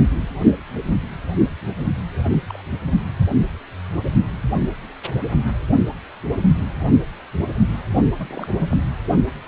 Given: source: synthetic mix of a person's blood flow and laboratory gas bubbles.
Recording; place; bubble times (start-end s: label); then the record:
Doppler ultrasound of blood flow; precordium
2.23-2.40 s: bubbles
2.48-2.62 s: bubbles
8.17-8.82 s: bubbles
From the record:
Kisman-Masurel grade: 221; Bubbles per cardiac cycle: several, 3 to 8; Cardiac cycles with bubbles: 10 to 50%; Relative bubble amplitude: barely perceptible (0.100 to 0.250); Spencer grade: 2 (many but less than half of the cardiac periods contain bubble signals, singularly or in groups); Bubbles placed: only in the low amplitude regions of the cardiac cycle